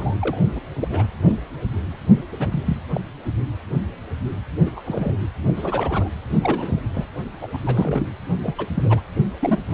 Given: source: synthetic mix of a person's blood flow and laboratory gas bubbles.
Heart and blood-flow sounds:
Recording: Doppler ultrasound of blood flow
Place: precordium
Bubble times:
0.00-0.15 s: bubbles
0.20-0.38 s: bubbles
0.52-0.60 s: bubbles
0.81-0.88 s: bubbles
0.90-1.06 s: bubbles
1.22-1.36 s: bubbles
2.29-2.77 s: bubbles
2.93-3.00 s: bubbles
4.65-4.70 s: bubbles
4.76-4.80 s: bubbles
4.85-5.14 s: bubbles
5.56-6.08 s: bubbles
6.42-6.82 s: bubbles
6.93-7.05 s: bubbles
7.41-7.47 s: bubbles
7.53-7.57 s: bubbles
7.66-8.07 s: bubbles
8.43-8.55 s: bubbles
8.58-9.00 s: bubbles
9.41-9.59 s: bubbles
9.70-9.74 s: bubbles
From the record:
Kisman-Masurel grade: 232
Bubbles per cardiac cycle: several, 3 to 8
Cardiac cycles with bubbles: 50 to 99%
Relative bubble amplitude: moderate (0.250 to 0.450)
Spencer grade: 3 (all of the cardiac periods contain showers or single bubble signals, but not dominating or overriding the cardiac motion signals)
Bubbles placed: only in the low amplitude regions of the cardiac cycle

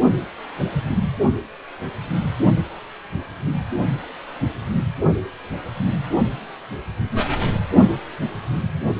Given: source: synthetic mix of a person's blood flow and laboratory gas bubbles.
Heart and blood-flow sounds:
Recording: Doppler ultrasound of blood flow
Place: precordium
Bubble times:
no bubbles
From the record:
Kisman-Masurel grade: 000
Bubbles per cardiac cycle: 0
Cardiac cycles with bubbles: 0%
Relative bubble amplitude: no bubbles discernible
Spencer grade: 0 (complete lack of bubble signals)

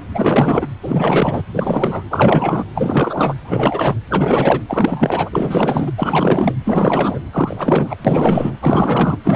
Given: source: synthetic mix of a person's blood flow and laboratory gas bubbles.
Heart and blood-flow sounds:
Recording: Doppler ultrasound of blood flow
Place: precordium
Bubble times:
0.14-0.67 s: bubbles
0.82-1.42 s: bubbles
1.54-2.04 s: bubbles
2.10-2.66 s: bubbles
2.75-3.34 s: bubbles
3.44-3.95 s: bubbles
4.09-4.61 s: bubbles
4.68-5.91 s: bubbles
5.97-6.54 s: bubbles
6.64-7.20 s: bubbles
7.33-7.96 s: bubbles
8.04-8.56 s: bubbles
8.61-9.17 s: bubbles
9.24-9.36 s: bubbles
From the record:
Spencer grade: 4 (maximum detectable bubble signal sounding continuously throughout systole and diastole of every cardiac period, and overriding the amplitude of the normal cardiac signals)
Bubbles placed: anywhere in the cardiac cycle

